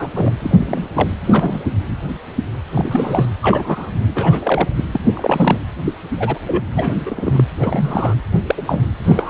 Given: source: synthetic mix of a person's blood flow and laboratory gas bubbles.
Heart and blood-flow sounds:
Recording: Doppler ultrasound of blood flow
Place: precordium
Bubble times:
0.00-0.08 s: bubbles
0.15-0.32 s: bubbles
0.39-0.88 s: bubbles
0.95-1.09 s: bubbles
1.24-1.59 s: bubbles
2.75-3.25 s: bubbles
3.42-3.91 s: bubbles
4.14-4.69 s: bubbles
4.77-4.85 s: bubbles
4.92-5.04 s: bubbles
5.13-5.58 s: bubbles
5.85-5.96 s: bubbles
6.17-6.38 s: bubbles
6.47-6.63 s: bubbles
6.75-6.95 s: bubbles
7.05-7.44 s: bubbles
7.61-8.14 s: bubbles
8.46-8.62 s: bubbles
8.67-8.81 s: bubbles
9.04-9.30 s: bubbles
From the record:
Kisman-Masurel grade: 232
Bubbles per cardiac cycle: several, 3 to 8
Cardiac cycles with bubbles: 50 to 99%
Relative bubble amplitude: moderate (0.250 to 0.450)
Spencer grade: 3 (all of the cardiac periods contain showers or single bubble signals, but not dominating or overriding the cardiac motion signals)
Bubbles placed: anywhere in the cardiac cycle

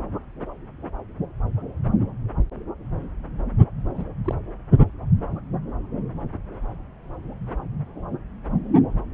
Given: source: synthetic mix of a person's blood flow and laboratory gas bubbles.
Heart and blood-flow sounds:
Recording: Doppler ultrasound of blood flow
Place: subclavian vein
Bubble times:
3.94-4.05 s: bubbles
4.24-4.34 s: bubbles
From the record:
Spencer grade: 2 (many but less than half of the cardiac periods contain bubble signals, singularly or in groups)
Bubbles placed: anywhere in the cardiac cycle

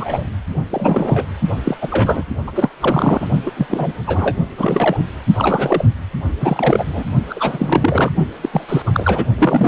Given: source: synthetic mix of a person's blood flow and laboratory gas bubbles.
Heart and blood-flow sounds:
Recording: Doppler ultrasound of blood flow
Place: precordium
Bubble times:
0.00-0.24 s: bubbles
0.69-1.27 s: bubbles
1.64-1.76 s: bubbles
1.81-2.25 s: bubbles
2.47-2.52 s: bubbles
2.54-2.70 s: bubbles
2.80-3.27 s: bubbles
3.46-3.51 s: bubbles
3.56-3.67 s: bubbles
3.70-3.93 s: bubbles
4.06-4.36 s: bubbles
4.57-5.04 s: bubbles
5.34-5.85 s: bubbles
6.40-7.03 s: bubbles
7.29-8.12 s: bubbles
8.42-8.49 s: bubbles
8.53-8.66 s: bubbles
8.69-8.82 s: bubbles
8.86-9.24 s: bubbles
9.37-9.68 s: bubbles
From the record:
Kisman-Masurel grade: 343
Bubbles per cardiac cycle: rolling drumbeat, 9 or more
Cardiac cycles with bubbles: 100%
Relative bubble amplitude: loud (0.450 to 0.775)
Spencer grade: 3 (all of the cardiac periods contain showers or single bubble signals, but not dominating or overriding the cardiac motion signals)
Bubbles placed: only in the low amplitude regions of the cardiac cycle

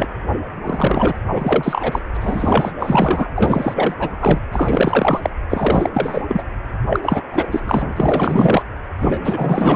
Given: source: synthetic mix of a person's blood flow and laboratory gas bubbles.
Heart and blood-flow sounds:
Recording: Doppler ultrasound of blood flow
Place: precordium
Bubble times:
0.00-0.08 s: bubbles
0.64-1.17 s: bubbles
1.33-2.00 s: bubbles
2.14-2.17 s: bubbles
2.20-2.72 s: bubbles
2.79-3.29 s: bubbles
3.35-3.94 s: bubbles
3.99-4.39 s: bubbles
4.51-5.30 s: bubbles
5.49-5.90 s: bubbles
5.93-6.21 s: bubbles
6.28-6.44 s: bubbles
6.89-7.00 s: bubbles
7.03-7.22 s: bubbles
7.31-7.47 s: bubbles
7.50-7.93 s: bubbles
7.97-8.62 s: bubbles
9.00-9.76 s: bubbles
From the record:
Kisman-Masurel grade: 444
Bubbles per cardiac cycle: continuous sound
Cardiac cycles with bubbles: 100%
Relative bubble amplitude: maximal (0.775 to 0.999)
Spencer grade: 4 (maximum detectable bubble signal sounding continuously throughout systole and diastole of every cardiac period, and overriding the amplitude of the normal cardiac signals)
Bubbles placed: anywhere in the cardiac cycle

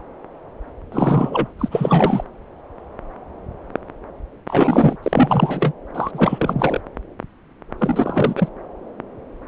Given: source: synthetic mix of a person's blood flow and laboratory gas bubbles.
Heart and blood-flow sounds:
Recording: Doppler ultrasound of blood flow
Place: subclavian vein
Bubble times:
0.92-1.48 s: bubbles
1.58-1.69 s: bubbles
1.71-2.24 s: bubbles
4.48-4.96 s: bubbles
5.03-5.73 s: bubbles
5.95-6.80 s: bubbles
7.78-8.48 s: bubbles
From the record:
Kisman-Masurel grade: 333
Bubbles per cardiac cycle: rolling drumbeat, 9 or more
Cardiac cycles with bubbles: 50 to 99%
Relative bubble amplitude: loud (0.450 to 0.775)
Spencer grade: 3 (all of the cardiac periods contain showers or single bubble signals, but not dominating or overriding the cardiac motion signals)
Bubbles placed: anywhere in the cardiac cycle

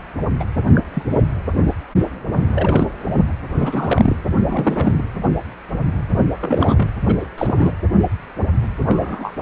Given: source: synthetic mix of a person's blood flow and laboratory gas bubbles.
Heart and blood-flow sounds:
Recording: Doppler ultrasound of blood flow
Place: precordium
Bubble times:
0.40-0.44 s: bubbles
0.74-0.81 s: bubbles
0.94-1.02 s: bubbles
1.10-1.21 s: bubbles
2.55-2.88 s: bubbles
3.56-4.16 s: bubbles
4.45-5.04 s: bubbles
6.40-6.92 s: bubbles
7.05-7.15 s: bubbles
7.19-7.26 s: bubbles
7.38-7.72 s: bubbles
8.83-9.34 s: bubbles
9.39-9.42 s: bubbles
From the record:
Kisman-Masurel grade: 232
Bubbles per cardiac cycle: several, 3 to 8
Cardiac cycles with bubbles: 50 to 99%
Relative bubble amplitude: moderate (0.250 to 0.450)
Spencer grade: 3 (all of the cardiac periods contain showers or single bubble signals, but not dominating or overriding the cardiac motion signals)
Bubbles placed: anywhere in the cardiac cycle

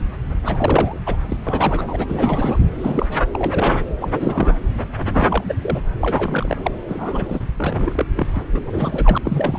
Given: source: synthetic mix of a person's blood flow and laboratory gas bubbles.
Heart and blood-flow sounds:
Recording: Doppler ultrasound of blood flow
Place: subclavian vein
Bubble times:
0.45-0.99 s: bubbles
1.05-1.17 s: bubbles
1.28-1.37 s: bubbles
1.45-2.06 s: bubbles
2.08-2.59 s: bubbles
2.81-3.06 s: bubbles
3.33-3.79 s: bubbles
4.01-4.57 s: bubbles
4.97-5.54 s: bubbles
5.62-5.81 s: bubbles
6.01-6.57 s: bubbles
6.62-6.71 s: bubbles
6.88-7.41 s: bubbles
7.57-8.05 s: bubbles
8.15-8.27 s: bubbles
8.35-8.44 s: bubbles
8.53-8.61 s: bubbles
8.67-9.18 s: bubbles
9.25-9.58 s: bubbles
From the record:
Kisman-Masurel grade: 342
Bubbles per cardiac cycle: rolling drumbeat, 9 or more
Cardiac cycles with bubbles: 100%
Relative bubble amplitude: moderate (0.250 to 0.450)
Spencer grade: 3 (all of the cardiac periods contain showers or single bubble signals, but not dominating or overriding the cardiac motion signals)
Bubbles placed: anywhere in the cardiac cycle

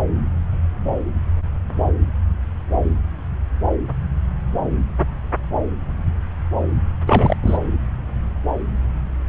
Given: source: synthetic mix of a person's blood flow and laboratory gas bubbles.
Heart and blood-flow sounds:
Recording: Doppler ultrasound of blood flow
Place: subclavian vein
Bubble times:
7.06-7.37 s: bubbles
7.42-7.58 s: bubbles
From the record:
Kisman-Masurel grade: 213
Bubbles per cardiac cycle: several, 3 to 8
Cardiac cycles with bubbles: 1 to 10%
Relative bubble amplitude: loud (0.450 to 0.775)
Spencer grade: 1 (occasional bubble signal discernible with the cardiac motion signal, with majority of cardiac periods free of bubbles)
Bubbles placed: anywhere in the cardiac cycle

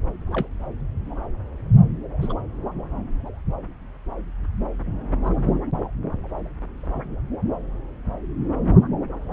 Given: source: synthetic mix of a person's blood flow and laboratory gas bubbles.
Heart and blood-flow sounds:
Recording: Doppler ultrasound of blood flow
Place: subclavian vein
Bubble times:
0.31-0.47 s: bubbles
2.21-2.33 s: bubbles
5.23-5.51 s: bubbles
From the record:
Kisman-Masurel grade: 121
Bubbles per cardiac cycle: 1 to 2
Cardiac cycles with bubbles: 10 to 50%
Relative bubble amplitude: barely perceptible (0.100 to 0.250)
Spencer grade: 2 (many but less than half of the cardiac periods contain bubble signals, singularly or in groups)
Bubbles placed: anywhere in the cardiac cycle

